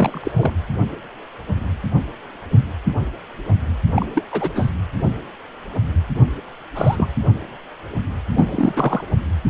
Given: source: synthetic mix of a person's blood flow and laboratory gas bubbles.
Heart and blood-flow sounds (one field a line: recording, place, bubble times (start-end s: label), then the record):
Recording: Doppler ultrasound of blood flow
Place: precordium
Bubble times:
0.00-0.21 s: bubbles
0.23-0.32 s: bubbles
0.35-0.52 s: bubbles
3.94-4.06 s: bubbles
4.14-4.22 s: bubbles
4.31-4.50 s: bubbles
4.55-4.69 s: bubbles
6.75-7.07 s: bubbles
8.34-9.04 s: bubbles
From the record:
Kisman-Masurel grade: 222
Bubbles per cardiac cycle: several, 3 to 8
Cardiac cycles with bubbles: 10 to 50%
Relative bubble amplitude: moderate (0.250 to 0.450)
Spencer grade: 2 (many but less than half of the cardiac periods contain bubble signals, singularly or in groups)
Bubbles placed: anywhere in the cardiac cycle